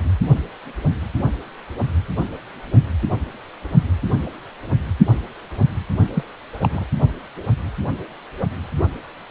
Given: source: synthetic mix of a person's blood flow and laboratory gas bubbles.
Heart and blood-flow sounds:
Doppler ultrasound of blood flow; precordium
6.14-6.24 s: bubbles
6.62-6.84 s: bubbles
From the record:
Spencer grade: 1 (occasional bubble signal discernible with the cardiac motion signal, with majority of cardiac periods free of bubbles); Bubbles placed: only in the low amplitude regions of the cardiac cycle

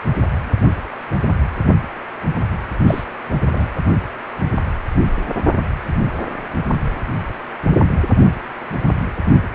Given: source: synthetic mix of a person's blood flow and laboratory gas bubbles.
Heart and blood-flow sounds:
Doppler ultrasound of blood flow; precordium
2.86-3.04 s: bubbles
3.52-3.69 s: bubbles
From the record:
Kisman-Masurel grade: 112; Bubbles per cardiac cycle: 1 to 2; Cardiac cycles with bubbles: 1 to 10%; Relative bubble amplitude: moderate (0.250 to 0.450); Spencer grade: 1 (occasional bubble signal discernible with the cardiac motion signal, with majority of cardiac periods free of bubbles); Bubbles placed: only in the low amplitude regions of the cardiac cycle

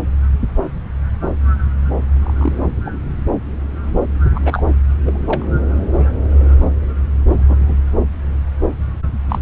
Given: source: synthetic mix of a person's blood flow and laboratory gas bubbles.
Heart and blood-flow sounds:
Doppler ultrasound of blood flow; subclavian vein
2.21-2.58 s: bubbles
2.86-2.90 s: bubbles
4.34-4.62 s: bubbles
5.05-5.45 s: bubbles
7.30-7.83 s: bubbles
9.29-9.38 s: bubbles
From the record:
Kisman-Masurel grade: 122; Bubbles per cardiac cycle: 1 to 2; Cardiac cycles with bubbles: 10 to 50%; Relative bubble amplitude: moderate (0.250 to 0.450); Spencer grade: 2 (many but less than half of the cardiac periods contain bubble signals, singularly or in groups); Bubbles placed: anywhere in the cardiac cycle

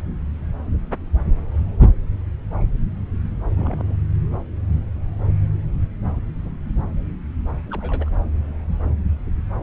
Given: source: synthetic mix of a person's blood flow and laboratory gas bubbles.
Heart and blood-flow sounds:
Doppler ultrasound of blood flow; subclavian vein
3.56-3.96 s: bubbles
7.71-8.11 s: bubbles
From the record:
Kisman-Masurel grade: 111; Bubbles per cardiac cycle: 1 to 2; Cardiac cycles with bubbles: 1 to 10%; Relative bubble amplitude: barely perceptible (0.100 to 0.250); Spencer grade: 1 (occasional bubble signal discernible with the cardiac motion signal, with majority of cardiac periods free of bubbles); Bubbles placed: anywhere in the cardiac cycle

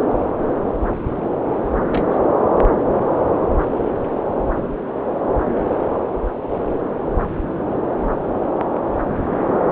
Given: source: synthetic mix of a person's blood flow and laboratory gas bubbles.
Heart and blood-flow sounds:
Doppler ultrasound of blood flow; subclavian vein
1.91-2.02 s: bubbles
2.10-2.19 s: bubbles
From the record:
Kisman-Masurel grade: 111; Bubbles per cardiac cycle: 1 to 2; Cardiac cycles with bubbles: 1 to 10%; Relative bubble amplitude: barely perceptible (0.100 to 0.250); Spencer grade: 1 (occasional bubble signal discernible with the cardiac motion signal, with majority of cardiac periods free of bubbles); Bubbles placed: anywhere in the cardiac cycle

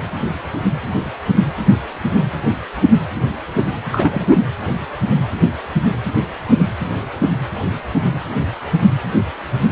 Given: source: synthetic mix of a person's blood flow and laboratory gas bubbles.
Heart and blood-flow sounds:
Doppler ultrasound of blood flow; precordium
3.92-4.38 s: bubbles
From the record:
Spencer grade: 1 (occasional bubble signal discernible with the cardiac motion signal, with majority of cardiac periods free of bubbles); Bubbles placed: anywhere in the cardiac cycle

